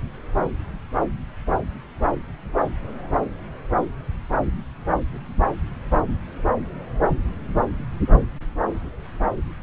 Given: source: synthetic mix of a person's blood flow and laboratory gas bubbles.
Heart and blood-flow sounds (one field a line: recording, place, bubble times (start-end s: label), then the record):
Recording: Doppler ultrasound of blood flow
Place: subclavian vein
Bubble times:
no bubbles
From the record:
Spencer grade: 0 (complete lack of bubble signals)